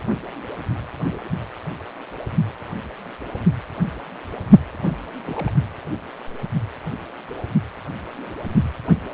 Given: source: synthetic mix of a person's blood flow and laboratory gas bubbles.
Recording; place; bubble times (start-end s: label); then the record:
Doppler ultrasound of blood flow; precordium
4.76-4.97 s: bubbles
5.26-5.52 s: bubbles
From the record:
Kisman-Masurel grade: 211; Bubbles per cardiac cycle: several, 3 to 8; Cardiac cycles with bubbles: 1 to 10%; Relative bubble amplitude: barely perceptible (0.100 to 0.250); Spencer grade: 1 (occasional bubble signal discernible with the cardiac motion signal, with majority of cardiac periods free of bubbles); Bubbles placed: anywhere in the cardiac cycle